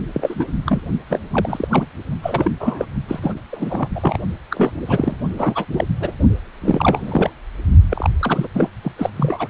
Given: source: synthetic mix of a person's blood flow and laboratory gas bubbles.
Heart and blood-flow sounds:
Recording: Doppler ultrasound of blood flow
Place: precordium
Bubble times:
0.13-0.46 s: bubbles
0.66-0.80 s: bubbles
1.10-1.20 s: bubbles
1.32-1.86 s: bubbles
2.22-2.51 s: bubbles
2.60-2.85 s: bubbles
3.08-3.39 s: bubbles
3.52-3.88 s: bubbles
3.95-4.17 s: bubbles
4.50-4.72 s: bubbles
4.85-5.16 s: bubbles
5.38-5.65 s: bubbles
5.72-5.84 s: bubbles
6.00-6.11 s: bubbles
6.61-7.30 s: bubbles
7.89-8.10 s: bubbles
8.20-8.48 s: bubbles
8.54-8.68 s: bubbles
8.81-8.92 s: bubbles
8.97-9.10 s: bubbles
9.16-9.50 s: bubbles
From the record:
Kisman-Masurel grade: 342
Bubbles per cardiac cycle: rolling drumbeat, 9 or more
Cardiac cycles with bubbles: 100%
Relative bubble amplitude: moderate (0.250 to 0.450)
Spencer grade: 3 (all of the cardiac periods contain showers or single bubble signals, but not dominating or overriding the cardiac motion signals)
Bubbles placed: only in the low amplitude regions of the cardiac cycle

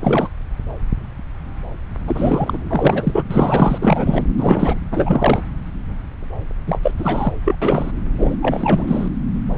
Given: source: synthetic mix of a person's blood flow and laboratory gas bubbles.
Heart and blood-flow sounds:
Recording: Doppler ultrasound of blood flow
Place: subclavian vein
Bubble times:
0.00-0.28 s: bubbles
2.06-2.58 s: bubbles
2.69-3.25 s: bubbles
3.31-3.78 s: bubbles
3.81-4.24 s: bubbles
4.37-4.80 s: bubbles
4.91-5.43 s: bubbles
6.66-6.80 s: bubbles
6.83-6.91 s: bubbles
6.98-7.33 s: bubbles
7.45-7.56 s: bubbles
7.62-7.91 s: bubbles
8.18-8.36 s: bubbles
8.42-9.09 s: bubbles
From the record:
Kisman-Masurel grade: 333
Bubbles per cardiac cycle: rolling drumbeat, 9 or more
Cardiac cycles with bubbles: 50 to 99%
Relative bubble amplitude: loud (0.450 to 0.775)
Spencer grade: 3 (all of the cardiac periods contain showers or single bubble signals, but not dominating or overriding the cardiac motion signals)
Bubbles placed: anywhere in the cardiac cycle

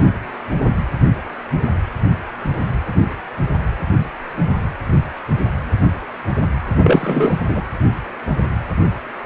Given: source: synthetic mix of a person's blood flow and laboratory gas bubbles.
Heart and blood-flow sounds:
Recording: Doppler ultrasound of blood flow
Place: precordium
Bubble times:
6.83-7.39 s: bubbles
7.48-7.62 s: bubbles
From the record:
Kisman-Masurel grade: 213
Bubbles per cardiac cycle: several, 3 to 8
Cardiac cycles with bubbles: 1 to 10%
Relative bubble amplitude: loud (0.450 to 0.775)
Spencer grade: 1 (occasional bubble signal discernible with the cardiac motion signal, with majority of cardiac periods free of bubbles)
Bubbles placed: anywhere in the cardiac cycle

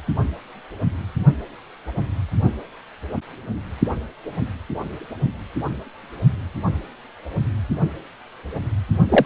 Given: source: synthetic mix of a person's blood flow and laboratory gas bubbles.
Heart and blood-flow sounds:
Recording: Doppler ultrasound of blood flow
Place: precordium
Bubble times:
9.09-9.25 s: bubbles
From the record:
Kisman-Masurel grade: 213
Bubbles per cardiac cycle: several, 3 to 8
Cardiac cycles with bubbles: 1 to 10%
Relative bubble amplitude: loud (0.450 to 0.775)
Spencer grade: 1 (occasional bubble signal discernible with the cardiac motion signal, with majority of cardiac periods free of bubbles)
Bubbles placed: only in the low amplitude regions of the cardiac cycle

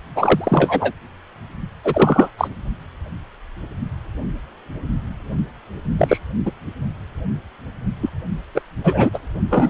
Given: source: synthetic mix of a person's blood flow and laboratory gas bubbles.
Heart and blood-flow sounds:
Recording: Doppler ultrasound of blood flow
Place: precordium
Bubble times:
0.15-0.93 s: bubbles
1.84-2.29 s: bubbles
2.38-2.48 s: bubbles
5.97-6.18 s: bubbles
6.45-6.51 s: bubbles
8.01-8.09 s: bubbles
8.54-8.62 s: bubbles
8.83-9.09 s: bubbles
9.13-9.18 s: bubbles
9.49-9.70 s: bubbles
From the record:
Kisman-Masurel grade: 233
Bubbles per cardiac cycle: several, 3 to 8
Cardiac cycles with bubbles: 50 to 99%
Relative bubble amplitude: loud (0.450 to 0.775)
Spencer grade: 3 (all of the cardiac periods contain showers or single bubble signals, but not dominating or overriding the cardiac motion signals)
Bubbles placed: only in the low amplitude regions of the cardiac cycle

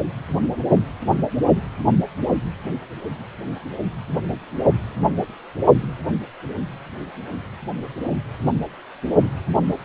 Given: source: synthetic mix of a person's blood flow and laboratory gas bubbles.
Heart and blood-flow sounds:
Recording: Doppler ultrasound of blood flow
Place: precordium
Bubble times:
no bubbles
From the record:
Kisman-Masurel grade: 000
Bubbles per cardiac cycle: 0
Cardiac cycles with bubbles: 0%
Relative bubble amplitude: no bubbles discernible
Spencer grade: 0 (complete lack of bubble signals)

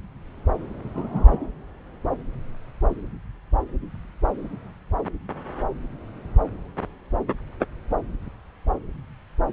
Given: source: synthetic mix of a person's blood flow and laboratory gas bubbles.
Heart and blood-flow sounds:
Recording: Doppler ultrasound of blood flow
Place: subclavian vein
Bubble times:
0.94-1.49 s: bubbles
From the record:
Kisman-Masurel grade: 112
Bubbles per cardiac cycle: 1 to 2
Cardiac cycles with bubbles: 1 to 10%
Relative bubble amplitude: moderate (0.250 to 0.450)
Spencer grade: 1 (occasional bubble signal discernible with the cardiac motion signal, with majority of cardiac periods free of bubbles)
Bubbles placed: anywhere in the cardiac cycle

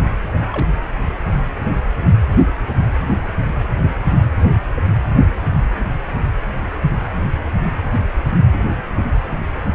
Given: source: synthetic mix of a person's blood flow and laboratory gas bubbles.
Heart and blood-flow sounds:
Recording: Doppler ultrasound of blood flow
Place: precordium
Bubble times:
0.53-0.73 s: bubbles
From the record:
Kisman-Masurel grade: 111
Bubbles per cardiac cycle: 1 to 2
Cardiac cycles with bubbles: 1 to 10%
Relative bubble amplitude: barely perceptible (0.100 to 0.250)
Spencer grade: 1 (occasional bubble signal discernible with the cardiac motion signal, with majority of cardiac periods free of bubbles)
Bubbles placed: anywhere in the cardiac cycle

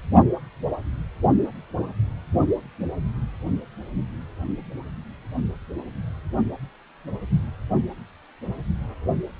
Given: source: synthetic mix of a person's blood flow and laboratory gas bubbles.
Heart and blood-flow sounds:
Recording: Doppler ultrasound of blood flow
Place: precordium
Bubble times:
no bubbles
From the record:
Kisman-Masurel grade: 000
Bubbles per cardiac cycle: 0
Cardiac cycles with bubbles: 0%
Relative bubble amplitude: no bubbles discernible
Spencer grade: 0 (complete lack of bubble signals)

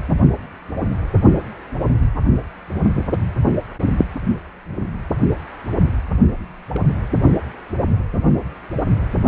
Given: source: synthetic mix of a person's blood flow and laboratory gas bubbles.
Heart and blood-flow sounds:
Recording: Doppler ultrasound of blood flow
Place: precordium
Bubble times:
6.74-6.81 s: bubbles
6.86-6.93 s: bubbles
From the record:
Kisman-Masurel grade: 111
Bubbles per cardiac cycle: 1 to 2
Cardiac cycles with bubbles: 1 to 10%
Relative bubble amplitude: barely perceptible (0.100 to 0.250)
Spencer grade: 1 (occasional bubble signal discernible with the cardiac motion signal, with majority of cardiac periods free of bubbles)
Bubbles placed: only in the low amplitude regions of the cardiac cycle

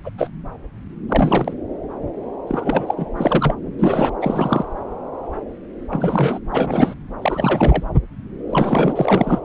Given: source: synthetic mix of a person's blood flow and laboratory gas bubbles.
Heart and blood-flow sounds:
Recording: Doppler ultrasound of blood flow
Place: subclavian vein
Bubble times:
0.03-0.10 s: bubbles
0.18-0.30 s: bubbles
1.08-1.54 s: bubbles
2.47-3.07 s: bubbles
3.17-3.54 s: bubbles
3.78-4.12 s: bubbles
4.21-4.65 s: bubbles
5.89-6.39 s: bubbles
6.51-6.94 s: bubbles
7.22-7.83 s: bubbles
8.49-9.40 s: bubbles
From the record:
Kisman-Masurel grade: 333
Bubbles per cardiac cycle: rolling drumbeat, 9 or more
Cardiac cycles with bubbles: 50 to 99%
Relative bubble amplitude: loud (0.450 to 0.775)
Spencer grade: 3 (all of the cardiac periods contain showers or single bubble signals, but not dominating or overriding the cardiac motion signals)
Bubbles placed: anywhere in the cardiac cycle

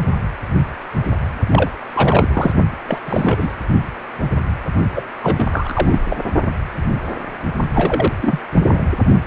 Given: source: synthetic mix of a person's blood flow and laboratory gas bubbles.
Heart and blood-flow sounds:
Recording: Doppler ultrasound of blood flow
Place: precordium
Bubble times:
1.48-1.71 s: bubbles
1.94-2.52 s: bubbles
2.88-2.98 s: bubbles
3.05-3.54 s: bubbles
4.96-5.06 s: bubbles
5.23-6.02 s: bubbles
6.08-6.17 s: bubbles
7.74-8.12 s: bubbles
8.21-8.39 s: bubbles
8.54-8.63 s: bubbles
8.66-8.82 s: bubbles
From the record:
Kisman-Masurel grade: 333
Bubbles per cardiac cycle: rolling drumbeat, 9 or more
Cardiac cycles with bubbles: 50 to 99%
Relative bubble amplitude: loud (0.450 to 0.775)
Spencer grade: 3 (all of the cardiac periods contain showers or single bubble signals, but not dominating or overriding the cardiac motion signals)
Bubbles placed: only in the low amplitude regions of the cardiac cycle

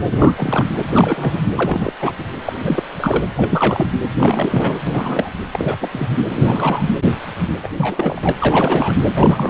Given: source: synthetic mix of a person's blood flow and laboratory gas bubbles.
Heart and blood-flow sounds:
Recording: Doppler ultrasound of blood flow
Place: precordium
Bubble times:
0.11-0.33 s: bubbles
0.35-0.67 s: bubbles
0.88-1.39 s: bubbles
1.56-1.93 s: bubbles
1.99-2.13 s: bubbles
2.18-2.24 s: bubbles
2.46-2.53 s: bubbles
2.60-2.83 s: bubbles
2.99-3.23 s: bubbles
3.36-3.87 s: bubbles
4.18-4.79 s: bubbles
4.87-5.30 s: bubbles
5.51-5.76 s: bubbles
5.80-5.89 s: bubbles
5.92-6.08 s: bubbles
6.28-6.90 s: bubbles
7.62-7.70 s: bubbles
7.77-8.32 s: bubbles
8.38-8.94 s: bubbles
9.15-9.50 s: bubbles
From the record:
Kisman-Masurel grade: 342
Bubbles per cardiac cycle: rolling drumbeat, 9 or more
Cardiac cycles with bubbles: 100%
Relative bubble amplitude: moderate (0.250 to 0.450)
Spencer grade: 3 (all of the cardiac periods contain showers or single bubble signals, but not dominating or overriding the cardiac motion signals)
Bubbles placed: anywhere in the cardiac cycle

